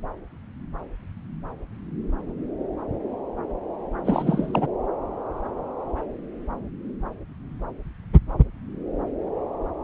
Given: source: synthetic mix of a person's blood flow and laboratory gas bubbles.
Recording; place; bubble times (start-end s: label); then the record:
Doppler ultrasound of blood flow; subclavian vein
4.04-4.67 s: bubbles
From the record:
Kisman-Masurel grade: 212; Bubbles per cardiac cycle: several, 3 to 8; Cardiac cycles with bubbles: 1 to 10%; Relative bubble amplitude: moderate (0.250 to 0.450); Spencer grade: 1 (occasional bubble signal discernible with the cardiac motion signal, with majority of cardiac periods free of bubbles); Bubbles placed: anywhere in the cardiac cycle